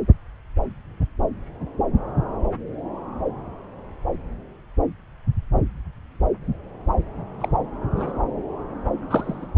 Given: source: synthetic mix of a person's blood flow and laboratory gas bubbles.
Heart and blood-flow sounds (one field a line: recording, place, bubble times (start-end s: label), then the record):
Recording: Doppler ultrasound of blood flow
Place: subclavian vein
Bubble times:
7.40-7.48 s: bubbles
7.96-8.19 s: bubbles
9.08-9.46 s: bubbles
From the record:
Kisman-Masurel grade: 122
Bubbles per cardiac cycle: 1 to 2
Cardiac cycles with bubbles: 10 to 50%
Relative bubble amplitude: moderate (0.250 to 0.450)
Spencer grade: 2 (many but less than half of the cardiac periods contain bubble signals, singularly or in groups)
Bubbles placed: anywhere in the cardiac cycle